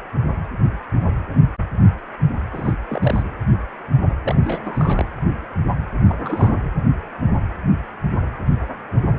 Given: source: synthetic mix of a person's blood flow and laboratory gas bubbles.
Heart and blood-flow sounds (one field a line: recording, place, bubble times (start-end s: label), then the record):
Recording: Doppler ultrasound of blood flow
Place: precordium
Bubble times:
2.53-2.73 s: bubbles
2.88-3.23 s: bubbles
4.22-4.35 s: bubbles
4.42-5.07 s: bubbles
6.07-6.52 s: bubbles
6.63-6.70 s: bubbles
From the record:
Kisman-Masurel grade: 221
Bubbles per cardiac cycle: several, 3 to 8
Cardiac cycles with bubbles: 10 to 50%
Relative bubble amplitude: barely perceptible (0.100 to 0.250)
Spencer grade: 2 (many but less than half of the cardiac periods contain bubble signals, singularly or in groups)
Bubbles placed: anywhere in the cardiac cycle